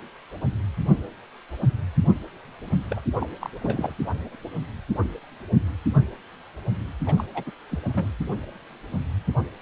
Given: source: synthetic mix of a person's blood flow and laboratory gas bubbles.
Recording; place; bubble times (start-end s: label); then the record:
Doppler ultrasound of blood flow; precordium
2.90-3.01 s: bubbles
3.20-3.29 s: bubbles
3.40-3.50 s: bubbles
3.62-3.94 s: bubbles
7.06-7.25 s: bubbles
7.34-7.44 s: bubbles
7.46-7.52 s: bubbles
7.70-7.79 s: bubbles
7.88-8.08 s: bubbles
From the record:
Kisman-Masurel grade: 221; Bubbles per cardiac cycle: several, 3 to 8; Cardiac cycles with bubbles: 10 to 50%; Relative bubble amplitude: barely perceptible (0.100 to 0.250); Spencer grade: 2 (many but less than half of the cardiac periods contain bubble signals, singularly or in groups); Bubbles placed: anywhere in the cardiac cycle